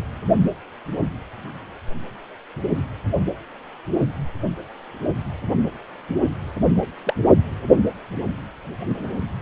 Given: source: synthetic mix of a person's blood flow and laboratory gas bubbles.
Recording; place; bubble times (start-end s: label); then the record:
Doppler ultrasound of blood flow; precordium
7.05-7.14 s: bubbles
From the record:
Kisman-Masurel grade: 112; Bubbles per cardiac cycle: 1 to 2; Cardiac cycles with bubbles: 1 to 10%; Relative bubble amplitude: moderate (0.250 to 0.450); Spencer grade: 1 (occasional bubble signal discernible with the cardiac motion signal, with majority of cardiac periods free of bubbles); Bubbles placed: only in the low amplitude regions of the cardiac cycle